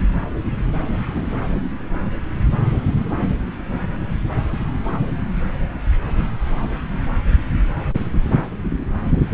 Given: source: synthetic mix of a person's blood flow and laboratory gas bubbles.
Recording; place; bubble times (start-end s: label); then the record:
Doppler ultrasound of blood flow; subclavian vein
no bubbles
From the record:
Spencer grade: 0 (complete lack of bubble signals)